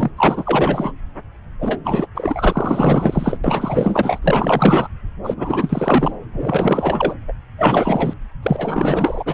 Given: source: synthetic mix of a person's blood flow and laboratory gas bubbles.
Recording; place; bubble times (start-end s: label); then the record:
Doppler ultrasound of blood flow; subclavian vein
0.00-0.10 s: bubbles
0.17-0.93 s: bubbles
1.59-1.79 s: bubbles
1.84-2.07 s: bubbles
2.15-3.40 s: bubbles
3.43-4.19 s: bubbles
4.23-4.88 s: bubbles
5.23-6.16 s: bubbles
6.33-7.15 s: bubbles
7.28-7.33 s: bubbles
7.58-8.13 s: bubbles
8.42-9.34 s: bubbles
From the record:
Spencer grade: 4 (maximum detectable bubble signal sounding continuously throughout systole and diastole of every cardiac period, and overriding the amplitude of the normal cardiac signals); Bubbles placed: anywhere in the cardiac cycle